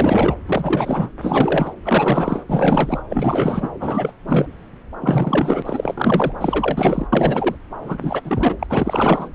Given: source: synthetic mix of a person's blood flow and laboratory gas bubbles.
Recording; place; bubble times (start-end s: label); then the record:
Doppler ultrasound of blood flow; subclavian vein
0.00-0.36 s: bubbles
0.47-1.10 s: bubbles
1.21-1.74 s: bubbles
1.85-2.44 s: bubbles
2.49-3.02 s: bubbles
3.10-3.69 s: bubbles
3.79-4.15 s: bubbles
4.27-4.47 s: bubbles
5.00-5.62 s: bubbles
5.66-6.32 s: bubbles
6.41-7.08 s: bubbles
7.12-7.56 s: bubbles
7.84-8.21 s: bubbles
8.24-9.29 s: bubbles
From the record:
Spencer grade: 4 (maximum detectable bubble signal sounding continuously throughout systole and diastole of every cardiac period, and overriding the amplitude of the normal cardiac signals); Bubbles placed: anywhere in the cardiac cycle